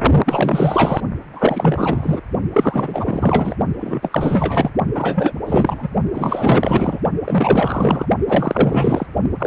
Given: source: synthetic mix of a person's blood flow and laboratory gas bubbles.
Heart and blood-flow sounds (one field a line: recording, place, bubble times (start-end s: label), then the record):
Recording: Doppler ultrasound of blood flow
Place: precordium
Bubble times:
0.26-1.00 s: bubbles
1.33-2.21 s: bubbles
2.53-3.56 s: bubbles
3.80-4.71 s: bubbles
4.95-5.33 s: bubbles
5.47-5.88 s: bubbles
6.14-7.00 s: bubbles
7.24-8.05 s: bubbles
8.28-9.06 s: bubbles
9.38-9.47 s: bubbles
From the record:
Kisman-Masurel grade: 444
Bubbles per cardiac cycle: continuous sound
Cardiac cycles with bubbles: 100%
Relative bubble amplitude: maximal (0.775 to 0.999)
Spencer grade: 4 (maximum detectable bubble signal sounding continuously throughout systole and diastole of every cardiac period, and overriding the amplitude of the normal cardiac signals)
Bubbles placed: only in the low amplitude regions of the cardiac cycle